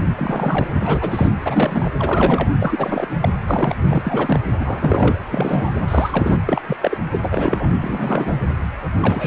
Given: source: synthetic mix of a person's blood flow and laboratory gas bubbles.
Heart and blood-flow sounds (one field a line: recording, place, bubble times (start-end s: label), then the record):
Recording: Doppler ultrasound of blood flow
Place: precordium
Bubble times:
0.16-0.66 s: bubbles
0.75-1.28 s: bubbles
1.33-1.39 s: bubbles
1.45-1.91 s: bubbles
1.99-2.48 s: bubbles
2.59-3.07 s: bubbles
3.21-3.29 s: bubbles
3.46-3.75 s: bubbles
3.88-4.39 s: bubbles
4.59-5.18 s: bubbles
5.29-5.79 s: bubbles
5.88-6.37 s: bubbles
6.48-6.62 s: bubbles
6.67-6.76 s: bubbles
6.81-6.97 s: bubbles
7.12-7.71 s: bubbles
7.80-8.35 s: bubbles
9.00-9.27 s: bubbles
From the record:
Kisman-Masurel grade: 332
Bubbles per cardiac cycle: rolling drumbeat, 9 or more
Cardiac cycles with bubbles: 50 to 99%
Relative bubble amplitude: moderate (0.250 to 0.450)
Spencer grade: 3 (all of the cardiac periods contain showers or single bubble signals, but not dominating or overriding the cardiac motion signals)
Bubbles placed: anywhere in the cardiac cycle